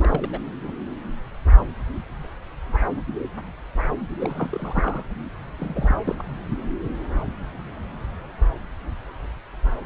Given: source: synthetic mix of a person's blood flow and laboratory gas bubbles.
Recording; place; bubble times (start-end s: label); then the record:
Doppler ultrasound of blood flow; subclavian vein
0.00-0.26 s: bubbles
0.32-0.39 s: bubbles
0.64-0.73 s: bubbles
4.20-5.02 s: bubbles
5.58-6.02 s: bubbles
6.04-6.25 s: bubbles
From the record:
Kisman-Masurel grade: 221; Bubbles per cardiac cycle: several, 3 to 8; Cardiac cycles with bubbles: 10 to 50%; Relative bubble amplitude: barely perceptible (0.100 to 0.250); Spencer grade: 2 (many but less than half of the cardiac periods contain bubble signals, singularly or in groups); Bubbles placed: anywhere in the cardiac cycle